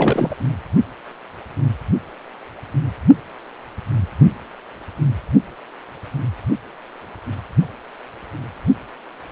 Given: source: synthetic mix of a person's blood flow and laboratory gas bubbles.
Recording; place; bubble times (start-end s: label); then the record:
Doppler ultrasound of blood flow; precordium
0.00-0.36 s: bubbles
From the record:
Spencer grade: 1 (occasional bubble signal discernible with the cardiac motion signal, with majority of cardiac periods free of bubbles); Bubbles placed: only in the low amplitude regions of the cardiac cycle